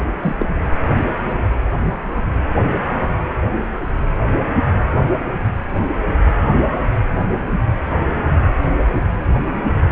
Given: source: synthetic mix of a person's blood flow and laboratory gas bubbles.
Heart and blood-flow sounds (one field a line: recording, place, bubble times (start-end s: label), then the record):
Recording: Doppler ultrasound of blood flow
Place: precordium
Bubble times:
0.21-0.36 s: bubbles
0.39-0.47 s: bubbles
From the record:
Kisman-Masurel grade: 212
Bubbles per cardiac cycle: several, 3 to 8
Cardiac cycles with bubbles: 1 to 10%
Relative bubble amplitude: moderate (0.250 to 0.450)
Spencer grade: 1 (occasional bubble signal discernible with the cardiac motion signal, with majority of cardiac periods free of bubbles)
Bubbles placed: anywhere in the cardiac cycle